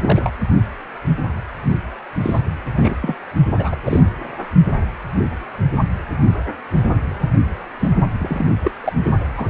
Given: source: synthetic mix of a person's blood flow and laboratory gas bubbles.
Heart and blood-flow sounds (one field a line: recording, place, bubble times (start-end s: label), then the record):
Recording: Doppler ultrasound of blood flow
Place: precordium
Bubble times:
0.02-0.30 s: bubbles
2.22-2.41 s: bubbles
2.76-2.95 s: bubbles
3.02-3.16 s: bubbles
3.58-3.75 s: bubbles
3.86-4.01 s: bubbles
7.80-7.90 s: bubbles
8.19-8.46 s: bubbles
8.62-8.71 s: bubbles
8.84-8.93 s: bubbles
9.03-9.11 s: bubbles
9.36-9.48 s: bubbles
From the record:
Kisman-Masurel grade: 232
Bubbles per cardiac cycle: several, 3 to 8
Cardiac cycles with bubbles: 50 to 99%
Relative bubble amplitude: moderate (0.250 to 0.450)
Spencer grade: 3 (all of the cardiac periods contain showers or single bubble signals, but not dominating or overriding the cardiac motion signals)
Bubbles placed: only in the low amplitude regions of the cardiac cycle